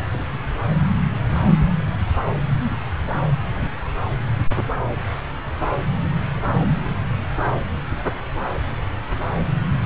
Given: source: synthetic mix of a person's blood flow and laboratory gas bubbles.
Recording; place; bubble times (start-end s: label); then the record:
Doppler ultrasound of blood flow; subclavian vein
0.13-0.25 s: bubbles
From the record:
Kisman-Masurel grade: 211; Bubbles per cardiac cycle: several, 3 to 8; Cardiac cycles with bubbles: 1 to 10%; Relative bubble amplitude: barely perceptible (0.100 to 0.250); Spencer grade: 1 (occasional bubble signal discernible with the cardiac motion signal, with majority of cardiac periods free of bubbles); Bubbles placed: anywhere in the cardiac cycle